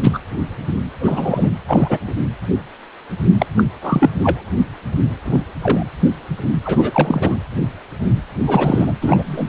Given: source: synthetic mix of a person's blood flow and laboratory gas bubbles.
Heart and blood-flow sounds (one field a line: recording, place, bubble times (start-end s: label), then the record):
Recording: Doppler ultrasound of blood flow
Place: precordium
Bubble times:
0.00-0.20 s: bubbles
0.99-1.49 s: bubbles
1.68-1.98 s: bubbles
2.08-2.14 s: bubbles
3.39-3.46 s: bubbles
3.57-3.64 s: bubbles
3.82-4.10 s: bubbles
4.21-4.50 s: bubbles
5.25-5.41 s: bubbles
5.62-5.86 s: bubbles
6.65-7.38 s: bubbles
8.46-8.92 s: bubbles
9.01-9.23 s: bubbles
9.25-9.48 s: bubbles
From the record:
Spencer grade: 3 (all of the cardiac periods contain showers or single bubble signals, but not dominating or overriding the cardiac motion signals)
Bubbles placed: anywhere in the cardiac cycle